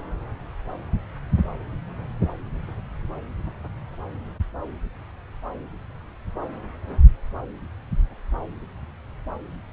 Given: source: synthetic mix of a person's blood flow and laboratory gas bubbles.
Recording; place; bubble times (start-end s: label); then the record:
Doppler ultrasound of blood flow; subclavian vein
no bubbles
From the record:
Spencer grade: 0 (complete lack of bubble signals)